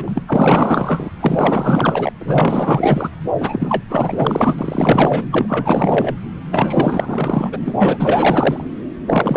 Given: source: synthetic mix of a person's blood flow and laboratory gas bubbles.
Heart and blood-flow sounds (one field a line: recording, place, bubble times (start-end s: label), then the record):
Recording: Doppler ultrasound of blood flow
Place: subclavian vein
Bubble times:
0.00-0.25 s: bubbles
0.27-1.10 s: bubbles
1.21-2.12 s: bubbles
2.19-3.10 s: bubbles
3.40-3.84 s: bubbles
3.90-4.55 s: bubbles
4.58-5.28 s: bubbles
5.31-6.14 s: bubbles
6.51-7.72 s: bubbles
7.78-8.65 s: bubbles
9.07-9.36 s: bubbles
From the record:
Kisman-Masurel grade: 444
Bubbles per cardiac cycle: continuous sound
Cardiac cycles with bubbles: 100%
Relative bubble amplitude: maximal (0.775 to 0.999)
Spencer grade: 4 (maximum detectable bubble signal sounding continuously throughout systole and diastole of every cardiac period, and overriding the amplitude of the normal cardiac signals)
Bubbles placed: anywhere in the cardiac cycle